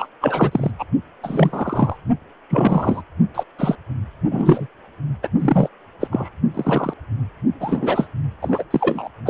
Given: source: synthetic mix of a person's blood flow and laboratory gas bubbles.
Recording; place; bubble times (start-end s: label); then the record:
Doppler ultrasound of blood flow; precordium
0.00-0.08 s: bubbles
0.21-0.71 s: bubbles
0.78-0.84 s: bubbles
1.23-1.97 s: bubbles
2.50-3.02 s: bubbles
3.34-3.43 s: bubbles
3.58-3.75 s: bubbles
4.31-4.67 s: bubbles
5.22-5.29 s: bubbles
5.39-5.68 s: bubbles
6.00-6.08 s: bubbles
6.11-6.29 s: bubbles
6.54-6.93 s: bubbles
7.60-8.07 s: bubbles
8.41-8.63 s: bubbles
8.71-9.09 s: bubbles
9.25-9.30 s: bubbles
From the record:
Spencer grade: 3 (all of the cardiac periods contain showers or single bubble signals, but not dominating or overriding the cardiac motion signals); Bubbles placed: only in the low amplitude regions of the cardiac cycle